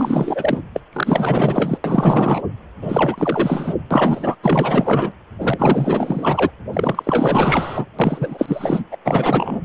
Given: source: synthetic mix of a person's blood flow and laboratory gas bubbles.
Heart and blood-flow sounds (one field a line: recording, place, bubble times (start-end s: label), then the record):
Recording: Doppler ultrasound of blood flow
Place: precordium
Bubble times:
0.00-0.61 s: bubbles
0.73-0.81 s: bubbles
0.92-1.77 s: bubbles
1.84-2.41 s: bubbles
2.81-3.75 s: bubbles
3.90-4.36 s: bubbles
4.42-5.12 s: bubbles
5.40-6.50 s: bubbles
6.73-7.86 s: bubbles
7.99-8.85 s: bubbles
8.91-8.98 s: bubbles
9.05-9.61 s: bubbles
From the record:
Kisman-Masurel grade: 444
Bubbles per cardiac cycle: continuous sound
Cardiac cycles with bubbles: 100%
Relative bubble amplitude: maximal (0.775 to 0.999)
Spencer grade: 4 (maximum detectable bubble signal sounding continuously throughout systole and diastole of every cardiac period, and overriding the amplitude of the normal cardiac signals)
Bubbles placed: anywhere in the cardiac cycle